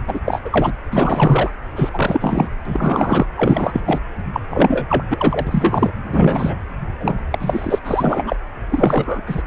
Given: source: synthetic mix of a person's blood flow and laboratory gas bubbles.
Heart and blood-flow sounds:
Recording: Doppler ultrasound of blood flow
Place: precordium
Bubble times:
0.07-0.20 s: bubbles
0.25-0.41 s: bubbles
0.45-0.72 s: bubbles
0.91-1.50 s: bubbles
1.76-1.90 s: bubbles
1.94-2.50 s: bubbles
2.65-3.26 s: bubbles
3.35-3.81 s: bubbles
3.86-4.00 s: bubbles
4.33-4.41 s: bubbles
4.50-5.04 s: bubbles
5.10-5.92 s: bubbles
6.12-6.56 s: bubbles
7.00-7.15 s: bubbles
7.31-7.79 s: bubbles
7.84-8.36 s: bubbles
8.69-9.22 s: bubbles
9.27-9.43 s: bubbles
From the record:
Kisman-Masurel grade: 343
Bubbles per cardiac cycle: rolling drumbeat, 9 or more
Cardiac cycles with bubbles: 100%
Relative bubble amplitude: loud (0.450 to 0.775)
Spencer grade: 3 (all of the cardiac periods contain showers or single bubble signals, but not dominating or overriding the cardiac motion signals)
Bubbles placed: anywhere in the cardiac cycle

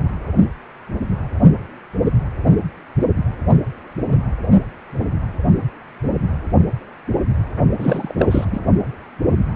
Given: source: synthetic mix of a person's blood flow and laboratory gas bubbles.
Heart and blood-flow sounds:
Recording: Doppler ultrasound of blood flow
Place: precordium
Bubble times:
7.78-8.45 s: bubbles
8.51-8.60 s: bubbles
From the record:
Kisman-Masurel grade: 212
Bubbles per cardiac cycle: several, 3 to 8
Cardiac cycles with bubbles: 1 to 10%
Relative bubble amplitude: moderate (0.250 to 0.450)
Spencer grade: 1 (occasional bubble signal discernible with the cardiac motion signal, with majority of cardiac periods free of bubbles)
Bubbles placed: only in the low amplitude regions of the cardiac cycle

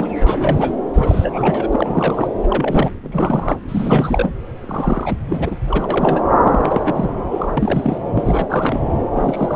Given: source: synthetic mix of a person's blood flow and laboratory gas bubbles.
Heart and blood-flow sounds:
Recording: Doppler ultrasound of blood flow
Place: subclavian vein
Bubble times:
0.00-0.07 s: bubbles
0.20-0.74 s: bubbles
0.94-1.68 s: bubbles
1.72-2.27 s: bubbles
2.43-2.48 s: bubbles
2.50-2.91 s: bubbles
3.03-3.56 s: bubbles
3.69-4.34 s: bubbles
4.62-5.18 s: bubbles
5.28-5.56 s: bubbles
5.67-6.21 s: bubbles
6.44-7.10 s: bubbles
7.31-7.52 s: bubbles
7.57-7.98 s: bubbles
8.15-8.46 s: bubbles
8.49-8.79 s: bubbles
9.13-9.56 s: bubbles
From the record:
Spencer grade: 3 (all of the cardiac periods contain showers or single bubble signals, but not dominating or overriding the cardiac motion signals)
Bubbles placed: anywhere in the cardiac cycle

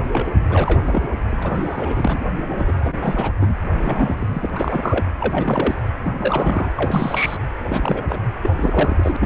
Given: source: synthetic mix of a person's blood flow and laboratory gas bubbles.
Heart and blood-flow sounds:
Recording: Doppler ultrasound of blood flow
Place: precordium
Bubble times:
0.12-0.29 s: bubbles
0.48-1.09 s: bubbles
1.28-2.27 s: bubbles
2.48-2.73 s: bubbles
2.80-2.97 s: bubbles
3.02-3.33 s: bubbles
3.41-3.56 s: bubbles
3.61-4.50 s: bubbles
4.56-5.04 s: bubbles
5.20-5.75 s: bubbles
6.03-6.71 s: bubbles
6.74-7.37 s: bubbles
7.69-8.04 s: bubbles
8.09-8.18 s: bubbles
8.42-8.50 s: bubbles
8.56-9.17 s: bubbles
9.20-9.25 s: bubbles
From the record:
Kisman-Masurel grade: 342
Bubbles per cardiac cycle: rolling drumbeat, 9 or more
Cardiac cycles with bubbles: 100%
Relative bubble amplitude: moderate (0.250 to 0.450)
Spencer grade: 3 (all of the cardiac periods contain showers or single bubble signals, but not dominating or overriding the cardiac motion signals)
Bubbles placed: anywhere in the cardiac cycle

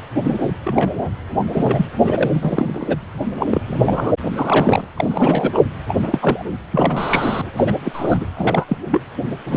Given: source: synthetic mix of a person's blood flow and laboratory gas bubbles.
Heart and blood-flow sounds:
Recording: Doppler ultrasound of blood flow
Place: precordium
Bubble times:
0.24-0.52 s: bubbles
0.64-0.90 s: bubbles
1.53-1.85 s: bubbles
2.04-2.31 s: bubbles
2.33-2.97 s: bubbles
3.38-3.46 s: bubbles
3.50-3.62 s: bubbles
3.68-4.11 s: bubbles
4.36-4.84 s: bubbles
4.96-5.62 s: bubbles
5.88-5.95 s: bubbles
6.02-6.45 s: bubbles
6.71-7.49 s: bubbles
7.56-7.72 s: bubbles
7.84-8.26 s: bubbles
8.37-8.64 s: bubbles
8.67-8.77 s: bubbles
8.91-9.01 s: bubbles
9.46-9.57 s: bubbles
From the record:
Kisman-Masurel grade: 242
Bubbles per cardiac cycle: several, 3 to 8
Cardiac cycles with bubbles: 100%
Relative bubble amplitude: moderate (0.250 to 0.450)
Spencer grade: 3 (all of the cardiac periods contain showers or single bubble signals, but not dominating or overriding the cardiac motion signals)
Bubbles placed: anywhere in the cardiac cycle

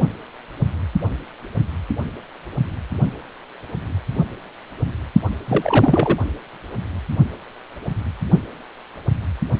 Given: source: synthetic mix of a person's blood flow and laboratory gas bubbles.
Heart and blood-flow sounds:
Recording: Doppler ultrasound of blood flow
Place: precordium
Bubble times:
5.46-6.18 s: bubbles
From the record:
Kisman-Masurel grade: 212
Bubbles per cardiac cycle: several, 3 to 8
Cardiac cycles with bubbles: 1 to 10%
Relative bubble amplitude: moderate (0.250 to 0.450)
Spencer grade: 1 (occasional bubble signal discernible with the cardiac motion signal, with majority of cardiac periods free of bubbles)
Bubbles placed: only in the low amplitude regions of the cardiac cycle

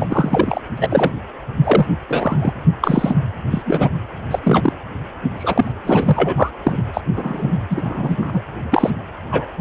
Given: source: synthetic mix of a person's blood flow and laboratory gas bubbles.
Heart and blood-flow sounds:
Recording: Doppler ultrasound of blood flow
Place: precordium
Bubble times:
0.00-0.61 s: bubbles
0.77-1.12 s: bubbles
1.64-1.86 s: bubbles
2.08-2.53 s: bubbles
2.81-3.19 s: bubbles
3.51-3.62 s: bubbles
3.65-3.89 s: bubbles
4.31-4.39 s: bubbles
4.43-4.73 s: bubbles
5.37-5.73 s: bubbles
5.84-6.50 s: bubbles
6.64-6.83 s: bubbles
6.94-7.01 s: bubbles
7.16-7.58 s: bubbles
7.70-8.41 s: bubbles
8.71-8.90 s: bubbles
9.31-9.47 s: bubbles
From the record:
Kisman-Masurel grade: 243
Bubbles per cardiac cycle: several, 3 to 8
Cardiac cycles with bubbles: 100%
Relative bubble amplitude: loud (0.450 to 0.775)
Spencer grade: 3 (all of the cardiac periods contain showers or single bubble signals, but not dominating or overriding the cardiac motion signals)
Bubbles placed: anywhere in the cardiac cycle

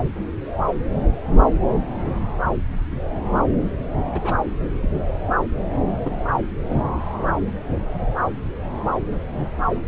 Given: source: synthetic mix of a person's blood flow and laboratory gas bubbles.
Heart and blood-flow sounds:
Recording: Doppler ultrasound of blood flow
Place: subclavian vein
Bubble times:
4.12-4.21 s: bubbles
4.23-4.36 s: bubbles
4.82-4.89 s: bubbles
6.02-6.15 s: bubbles
From the record:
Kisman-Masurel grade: 121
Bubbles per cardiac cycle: 1 to 2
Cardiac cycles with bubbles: 10 to 50%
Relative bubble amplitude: barely perceptible (0.100 to 0.250)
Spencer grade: 2 (many but less than half of the cardiac periods contain bubble signals, singularly or in groups)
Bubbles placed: anywhere in the cardiac cycle

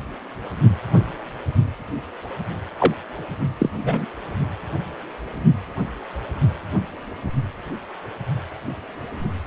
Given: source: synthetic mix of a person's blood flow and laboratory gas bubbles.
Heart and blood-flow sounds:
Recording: Doppler ultrasound of blood flow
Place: precordium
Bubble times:
2.78-2.94 s: bubbles
3.58-3.70 s: bubbles
3.84-4.05 s: bubbles
From the record:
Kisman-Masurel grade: 122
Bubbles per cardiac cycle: 1 to 2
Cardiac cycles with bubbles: 10 to 50%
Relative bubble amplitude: moderate (0.250 to 0.450)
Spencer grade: 2 (many but less than half of the cardiac periods contain bubble signals, singularly or in groups)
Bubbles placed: only in the low amplitude regions of the cardiac cycle

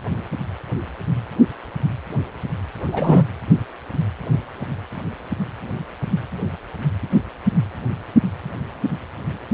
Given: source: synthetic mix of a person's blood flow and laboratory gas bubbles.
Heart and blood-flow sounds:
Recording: Doppler ultrasound of blood flow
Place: precordium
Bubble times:
2.92-3.24 s: bubbles
From the record:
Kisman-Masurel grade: 113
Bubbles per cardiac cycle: 1 to 2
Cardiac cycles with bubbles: 1 to 10%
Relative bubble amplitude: loud (0.450 to 0.775)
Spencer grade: 1 (occasional bubble signal discernible with the cardiac motion signal, with majority of cardiac periods free of bubbles)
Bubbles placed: anywhere in the cardiac cycle

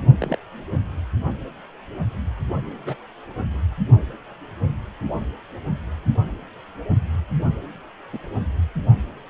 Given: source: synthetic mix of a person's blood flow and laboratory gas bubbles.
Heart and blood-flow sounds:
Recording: Doppler ultrasound of blood flow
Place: precordium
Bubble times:
0.21-0.36 s: bubbles
2.77-2.96 s: bubbles
8.12-8.20 s: bubbles
From the record:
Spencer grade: 2 (many but less than half of the cardiac periods contain bubble signals, singularly or in groups)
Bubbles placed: only in the low amplitude regions of the cardiac cycle

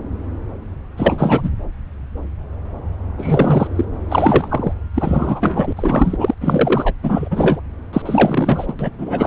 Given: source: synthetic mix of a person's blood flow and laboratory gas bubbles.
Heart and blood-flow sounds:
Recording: Doppler ultrasound of blood flow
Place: subclavian vein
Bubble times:
0.97-1.51 s: bubbles
3.18-3.68 s: bubbles
3.75-3.85 s: bubbles
4.08-4.73 s: bubbles
4.94-5.73 s: bubbles
5.76-6.35 s: bubbles
6.41-6.94 s: bubbles
7.03-7.61 s: bubbles
7.92-8.02 s: bubbles
8.05-8.73 s: bubbles
8.79-8.89 s: bubbles
8.98-9.27 s: bubbles
From the record:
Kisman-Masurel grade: 333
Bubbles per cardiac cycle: rolling drumbeat, 9 or more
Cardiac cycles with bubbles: 50 to 99%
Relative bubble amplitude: loud (0.450 to 0.775)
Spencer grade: 3 (all of the cardiac periods contain showers or single bubble signals, but not dominating or overriding the cardiac motion signals)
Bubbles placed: anywhere in the cardiac cycle

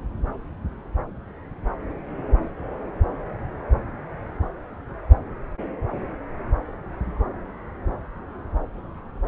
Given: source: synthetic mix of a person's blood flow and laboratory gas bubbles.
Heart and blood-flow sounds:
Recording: Doppler ultrasound of blood flow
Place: subclavian vein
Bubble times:
no bubbles
From the record:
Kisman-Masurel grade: 000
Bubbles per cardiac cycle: 0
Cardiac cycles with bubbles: 0%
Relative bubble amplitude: no bubbles discernible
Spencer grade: 0 (complete lack of bubble signals)

